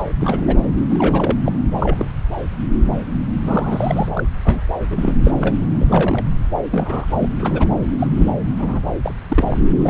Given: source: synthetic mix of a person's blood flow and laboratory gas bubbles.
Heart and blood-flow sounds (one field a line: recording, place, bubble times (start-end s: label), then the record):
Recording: Doppler ultrasound of blood flow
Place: subclavian vein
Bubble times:
0.00-0.03 s: bubbles
0.06-0.08 s: bubbles
0.20-0.56 s: bubbles
0.90-1.35 s: bubbles
1.44-1.52 s: bubbles
1.78-2.07 s: bubbles
3.42-4.09 s: bubbles
4.15-4.23 s: bubbles
4.44-4.62 s: bubbles
4.90-5.13 s: bubbles
5.24-5.32 s: bubbles
5.41-5.56 s: bubbles
5.59-5.67 s: bubbles
5.78-6.24 s: bubbles
6.71-7.05 s: bubbles
7.17-7.29 s: bubbles
7.39-7.68 s: bubbles
7.99-8.07 s: bubbles
8.17-8.32 s: bubbles
8.57-8.79 s: bubbles
9.03-9.14 s: bubbles
9.29-9.57 s: bubbles
9.82-9.90 s: bubbles
From the record:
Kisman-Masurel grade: 232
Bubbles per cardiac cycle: several, 3 to 8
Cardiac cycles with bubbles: 50 to 99%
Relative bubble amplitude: moderate (0.250 to 0.450)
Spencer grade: 3 (all of the cardiac periods contain showers or single bubble signals, but not dominating or overriding the cardiac motion signals)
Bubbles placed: anywhere in the cardiac cycle